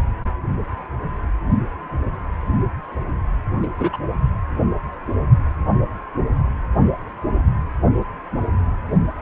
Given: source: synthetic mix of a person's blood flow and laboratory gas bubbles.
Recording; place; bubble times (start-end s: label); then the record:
Doppler ultrasound of blood flow; precordium
3.62-3.68 s: bubbles
3.79-3.90 s: bubbles
3.92-3.97 s: bubbles
From the record:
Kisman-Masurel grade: 223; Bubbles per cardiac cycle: several, 3 to 8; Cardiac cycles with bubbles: 10 to 50%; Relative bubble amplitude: loud (0.450 to 0.775); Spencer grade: 2 (many but less than half of the cardiac periods contain bubble signals, singularly or in groups); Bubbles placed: anywhere in the cardiac cycle